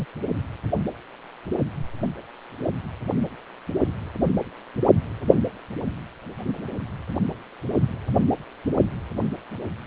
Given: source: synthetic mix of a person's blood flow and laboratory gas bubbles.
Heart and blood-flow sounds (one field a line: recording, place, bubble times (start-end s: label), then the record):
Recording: Doppler ultrasound of blood flow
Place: precordium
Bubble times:
0.00-0.05 s: bubbles
From the record:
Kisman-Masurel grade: 111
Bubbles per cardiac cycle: 1 to 2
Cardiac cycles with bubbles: 1 to 10%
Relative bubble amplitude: barely perceptible (0.100 to 0.250)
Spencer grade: 1 (occasional bubble signal discernible with the cardiac motion signal, with majority of cardiac periods free of bubbles)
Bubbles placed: anywhere in the cardiac cycle